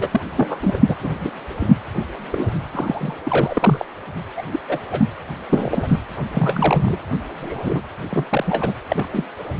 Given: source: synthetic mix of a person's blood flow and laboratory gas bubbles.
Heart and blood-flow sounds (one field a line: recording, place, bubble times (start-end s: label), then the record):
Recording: Doppler ultrasound of blood flow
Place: precordium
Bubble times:
0.00-0.07 s: bubbles
0.12-0.20 s: bubbles
0.36-0.59 s: bubbles
0.62-0.79 s: bubbles
0.87-0.95 s: bubbles
1.02-1.14 s: bubbles
1.20-1.30 s: bubbles
1.60-1.76 s: bubbles
2.32-2.50 s: bubbles
2.73-3.15 s: bubbles
3.23-3.85 s: bubbles
4.37-4.42 s: bubbles
4.51-4.60 s: bubbles
4.68-4.79 s: bubbles
4.91-5.09 s: bubbles
5.49-5.96 s: bubbles
6.33-6.98 s: bubbles
7.42-7.81 s: bubbles
8.11-8.25 s: bubbles
8.29-8.74 s: bubbles
8.88-9.06 s: bubbles
9.12-9.26 s: bubbles
From the record:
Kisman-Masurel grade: 242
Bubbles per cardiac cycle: several, 3 to 8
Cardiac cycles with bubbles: 100%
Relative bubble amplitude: moderate (0.250 to 0.450)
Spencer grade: 3 (all of the cardiac periods contain showers or single bubble signals, but not dominating or overriding the cardiac motion signals)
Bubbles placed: anywhere in the cardiac cycle